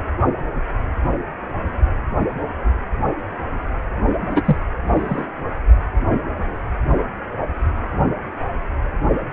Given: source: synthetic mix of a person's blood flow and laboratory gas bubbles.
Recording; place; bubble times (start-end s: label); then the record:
Doppler ultrasound of blood flow; precordium
4.30-4.42 s: bubbles
4.45-4.57 s: bubbles
4.94-5.25 s: bubbles
From the record:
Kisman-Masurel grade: 223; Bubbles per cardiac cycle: several, 3 to 8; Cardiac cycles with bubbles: 10 to 50%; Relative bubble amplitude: loud (0.450 to 0.775); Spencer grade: 2 (many but less than half of the cardiac periods contain bubble signals, singularly or in groups); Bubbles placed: only in the low amplitude regions of the cardiac cycle